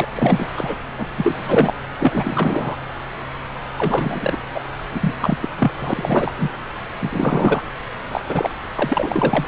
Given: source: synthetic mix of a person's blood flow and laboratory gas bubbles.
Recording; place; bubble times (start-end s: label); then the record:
Doppler ultrasound of blood flow; subclavian vein
0.00-0.07 s: bubbles
0.12-0.47 s: bubbles
0.57-0.76 s: bubbles
0.97-1.07 s: bubbles
1.17-1.74 s: bubbles
1.99-2.76 s: bubbles
3.78-4.37 s: bubbles
4.54-4.62 s: bubbles
4.91-5.14 s: bubbles
5.20-5.38 s: bubbles
5.42-5.49 s: bubbles
5.58-5.71 s: bubbles
5.79-6.35 s: bubbles
6.38-6.49 s: bubbles
7.02-7.62 s: bubbles
8.12-8.21 s: bubbles
8.29-8.50 s: bubbles
8.76-9.46 s: bubbles
From the record:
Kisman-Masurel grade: 333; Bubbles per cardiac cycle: rolling drumbeat, 9 or more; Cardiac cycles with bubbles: 50 to 99%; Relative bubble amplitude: loud (0.450 to 0.775); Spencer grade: 3 (all of the cardiac periods contain showers or single bubble signals, but not dominating or overriding the cardiac motion signals); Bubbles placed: anywhere in the cardiac cycle